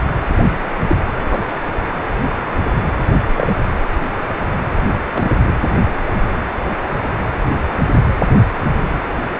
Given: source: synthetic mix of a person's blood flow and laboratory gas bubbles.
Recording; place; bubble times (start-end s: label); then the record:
Doppler ultrasound of blood flow; precordium
0.87-0.96 s: bubbles
1.18-1.43 s: bubbles
3.38-3.52 s: bubbles
5.12-5.52 s: bubbles
From the record:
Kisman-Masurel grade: 122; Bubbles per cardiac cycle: 1 to 2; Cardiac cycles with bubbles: 10 to 50%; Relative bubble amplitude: moderate (0.250 to 0.450); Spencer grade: 2 (many but less than half of the cardiac periods contain bubble signals, singularly or in groups); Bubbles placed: anywhere in the cardiac cycle